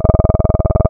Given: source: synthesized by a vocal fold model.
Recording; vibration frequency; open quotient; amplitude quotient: sustained vowel; 20 Hz; 0.2; 1.2